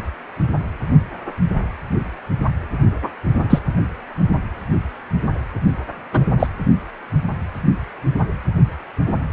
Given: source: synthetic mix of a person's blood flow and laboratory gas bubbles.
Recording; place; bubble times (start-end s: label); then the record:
Doppler ultrasound of blood flow; precordium
3.04-3.09 s: bubbles
3.50-3.59 s: bubbles
6.12-6.25 s: bubbles
6.39-6.47 s: bubbles
From the record:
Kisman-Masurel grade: 123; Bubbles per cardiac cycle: 1 to 2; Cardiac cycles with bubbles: 10 to 50%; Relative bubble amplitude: loud (0.450 to 0.775); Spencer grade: 2 (many but less than half of the cardiac periods contain bubble signals, singularly or in groups); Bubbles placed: anywhere in the cardiac cycle